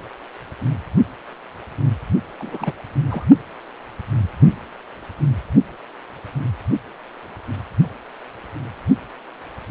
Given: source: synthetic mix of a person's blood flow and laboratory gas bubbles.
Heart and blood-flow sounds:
Doppler ultrasound of blood flow; precordium
2.39-2.73 s: bubbles
3.10-3.25 s: bubbles
From the record:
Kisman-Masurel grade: 211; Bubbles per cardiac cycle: several, 3 to 8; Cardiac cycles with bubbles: 1 to 10%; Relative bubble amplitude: barely perceptible (0.100 to 0.250); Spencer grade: 1 (occasional bubble signal discernible with the cardiac motion signal, with majority of cardiac periods free of bubbles); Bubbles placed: only in the low amplitude regions of the cardiac cycle

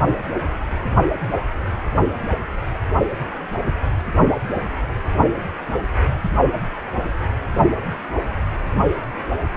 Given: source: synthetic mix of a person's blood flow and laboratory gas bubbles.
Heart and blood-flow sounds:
Doppler ultrasound of blood flow; precordium
no bubbles
From the record:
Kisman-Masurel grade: 000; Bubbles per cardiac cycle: 0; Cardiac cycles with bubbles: 0%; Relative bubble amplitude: no bubbles discernible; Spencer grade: 0 (complete lack of bubble signals)

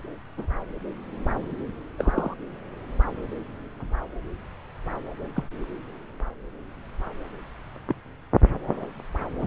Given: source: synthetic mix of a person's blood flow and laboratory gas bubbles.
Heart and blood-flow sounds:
Doppler ultrasound of blood flow; subclavian vein
0.37-0.46 s: bubbles
1.98-2.34 s: bubbles
5.34-5.44 s: bubbles
7.88-7.95 s: bubbles
9.38-9.47 s: bubbles
From the record:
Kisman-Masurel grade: 121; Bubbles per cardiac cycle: 1 to 2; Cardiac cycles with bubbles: 10 to 50%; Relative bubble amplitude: barely perceptible (0.100 to 0.250); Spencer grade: 2 (many but less than half of the cardiac periods contain bubble signals, singularly or in groups); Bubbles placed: anywhere in the cardiac cycle

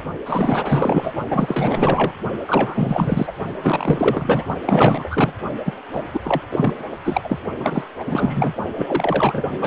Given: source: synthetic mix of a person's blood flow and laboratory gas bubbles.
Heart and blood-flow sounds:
Doppler ultrasound of blood flow; precordium
0.25-1.12 s: bubbles
1.30-2.12 s: bubbles
2.48-3.33 s: bubbles
3.62-4.45 s: bubbles
4.66-5.35 s: bubbles
5.65-5.73 s: bubbles
5.92-6.03 s: bubbles
6.13-6.20 s: bubbles
6.24-6.42 s: bubbles
6.51-6.75 s: bubbles
7.04-7.21 s: bubbles
7.24-7.38 s: bubbles
7.60-7.83 s: bubbles
8.00-8.55 s: bubbles
8.76-9.50 s: bubbles
9.59-9.67 s: bubbles
From the record:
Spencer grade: 4 (maximum detectable bubble signal sounding continuously throughout systole and diastole of every cardiac period, and overriding the amplitude of the normal cardiac signals); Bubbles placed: only in the low amplitude regions of the cardiac cycle

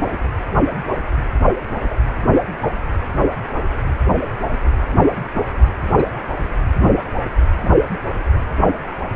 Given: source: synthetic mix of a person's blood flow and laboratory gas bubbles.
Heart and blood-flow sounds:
Doppler ultrasound of blood flow; precordium
0.00-0.18 s: bubbles
1.89-1.95 s: bubbles
5.33-5.42 s: bubbles
5.97-6.03 s: bubbles
7.61-7.71 s: bubbles
From the record:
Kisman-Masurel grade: 121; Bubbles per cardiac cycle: 1 to 2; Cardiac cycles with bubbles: 10 to 50%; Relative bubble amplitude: barely perceptible (0.100 to 0.250); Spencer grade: 2 (many but less than half of the cardiac periods contain bubble signals, singularly or in groups); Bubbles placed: anywhere in the cardiac cycle

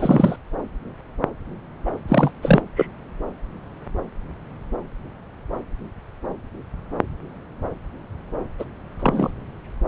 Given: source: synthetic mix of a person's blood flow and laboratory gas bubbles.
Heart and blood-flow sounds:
Doppler ultrasound of blood flow; subclavian vein
0.00-0.36 s: bubbles
1.85-1.92 s: bubbles
2.08-2.32 s: bubbles
2.42-2.61 s: bubbles
2.76-2.87 s: bubbles
8.59-8.65 s: bubbles
8.99-9.31 s: bubbles
From the record:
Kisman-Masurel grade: 223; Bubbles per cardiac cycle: several, 3 to 8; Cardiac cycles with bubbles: 10 to 50%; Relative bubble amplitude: loud (0.450 to 0.775); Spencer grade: 2 (many but less than half of the cardiac periods contain bubble signals, singularly or in groups); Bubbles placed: anywhere in the cardiac cycle

